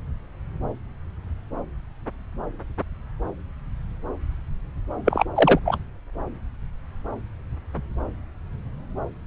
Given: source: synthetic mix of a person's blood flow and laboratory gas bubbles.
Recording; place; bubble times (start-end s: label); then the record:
Doppler ultrasound of blood flow; subclavian vein
5.05-5.24 s: bubbles
5.35-5.59 s: bubbles
5.65-5.78 s: bubbles
From the record:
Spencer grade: 2 (many but less than half of the cardiac periods contain bubble signals, singularly or in groups); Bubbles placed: anywhere in the cardiac cycle